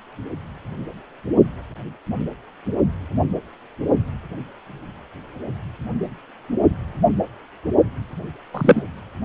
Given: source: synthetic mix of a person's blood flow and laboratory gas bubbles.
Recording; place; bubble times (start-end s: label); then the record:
Doppler ultrasound of blood flow; precordium
8.54-8.82 s: bubbles
From the record:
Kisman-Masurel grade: 123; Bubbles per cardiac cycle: 1 to 2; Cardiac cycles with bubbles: 10 to 50%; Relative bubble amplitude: loud (0.450 to 0.775); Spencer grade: 2 (many but less than half of the cardiac periods contain bubble signals, singularly or in groups); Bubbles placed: only in the low amplitude regions of the cardiac cycle